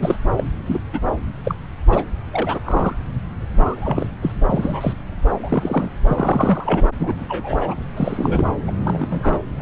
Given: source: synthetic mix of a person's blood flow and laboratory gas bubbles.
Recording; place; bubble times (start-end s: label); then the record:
Doppler ultrasound of blood flow; subclavian vein
0.00-0.17 s: bubbles
0.36-0.44 s: bubbles
0.66-0.79 s: bubbles
0.93-0.99 s: bubbles
1.43-1.56 s: bubbles
1.89-2.04 s: bubbles
2.33-2.60 s: bubbles
2.65-2.96 s: bubbles
3.57-4.08 s: bubbles
4.21-4.32 s: bubbles
4.47-4.93 s: bubbles
5.43-5.90 s: bubbles
6.05-6.86 s: bubbles
6.99-7.25 s: bubbles
7.28-7.75 s: bubbles
7.96-8.45 s: bubbles
8.68-8.71 s: bubbles
8.84-9.39 s: bubbles
9.58-9.62 s: bubbles
From the record:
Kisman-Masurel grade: 242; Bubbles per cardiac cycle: several, 3 to 8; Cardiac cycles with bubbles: 100%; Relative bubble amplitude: moderate (0.250 to 0.450); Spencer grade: 3 (all of the cardiac periods contain showers or single bubble signals, but not dominating or overriding the cardiac motion signals); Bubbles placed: anywhere in the cardiac cycle